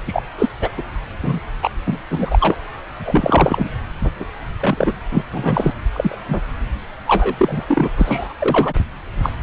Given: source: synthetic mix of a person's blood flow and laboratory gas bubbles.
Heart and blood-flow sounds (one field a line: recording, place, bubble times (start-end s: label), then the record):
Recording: Doppler ultrasound of blood flow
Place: subclavian vein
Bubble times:
0.07-0.23 s: bubbles
0.38-0.49 s: bubbles
0.61-0.69 s: bubbles
0.77-0.83 s: bubbles
1.22-1.40 s: bubbles
1.62-1.70 s: bubbles
1.86-1.98 s: bubbles
2.10-2.55 s: bubbles
3.05-3.69 s: bubbles
4.02-4.10 s: bubbles
4.20-4.24 s: bubbles
4.60-4.97 s: bubbles
5.11-5.24 s: bubbles
5.33-5.73 s: bubbles
5.93-6.17 s: bubbles
6.29-6.41 s: bubbles
7.07-7.65 s: bubbles
7.68-7.89 s: bubbles
7.96-8.34 s: bubbles
8.38-8.73 s: bubbles
9.22-9.29 s: bubbles
From the record:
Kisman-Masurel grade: 233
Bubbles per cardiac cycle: several, 3 to 8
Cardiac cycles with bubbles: 50 to 99%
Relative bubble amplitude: loud (0.450 to 0.775)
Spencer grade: 3 (all of the cardiac periods contain showers or single bubble signals, but not dominating or overriding the cardiac motion signals)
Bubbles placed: anywhere in the cardiac cycle